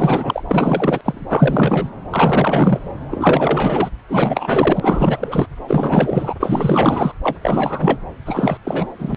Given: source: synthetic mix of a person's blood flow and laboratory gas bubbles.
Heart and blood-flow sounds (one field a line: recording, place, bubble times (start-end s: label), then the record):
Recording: Doppler ultrasound of blood flow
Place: subclavian vein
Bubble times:
0.00-0.43 s: bubbles
0.48-1.01 s: bubbles
1.04-1.89 s: bubbles
2.10-2.91 s: bubbles
3.11-3.90 s: bubbles
4.08-5.49 s: bubbles
5.67-6.36 s: bubbles
6.40-7.12 s: bubbles
7.23-7.38 s: bubbles
7.42-8.00 s: bubbles
8.25-8.57 s: bubbles
8.64-8.87 s: bubbles
8.98-9.15 s: bubbles
From the record:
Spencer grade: 4 (maximum detectable bubble signal sounding continuously throughout systole and diastole of every cardiac period, and overriding the amplitude of the normal cardiac signals)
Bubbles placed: anywhere in the cardiac cycle